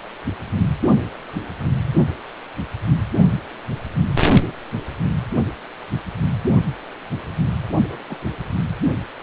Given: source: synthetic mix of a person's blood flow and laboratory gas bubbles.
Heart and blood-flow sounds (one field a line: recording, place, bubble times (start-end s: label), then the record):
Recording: Doppler ultrasound of blood flow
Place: precordium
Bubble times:
7.89-8.27 s: bubbles
From the record:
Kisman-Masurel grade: 121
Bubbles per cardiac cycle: 1 to 2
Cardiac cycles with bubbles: 10 to 50%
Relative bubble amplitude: barely perceptible (0.100 to 0.250)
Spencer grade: 2 (many but less than half of the cardiac periods contain bubble signals, singularly or in groups)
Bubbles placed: only in the low amplitude regions of the cardiac cycle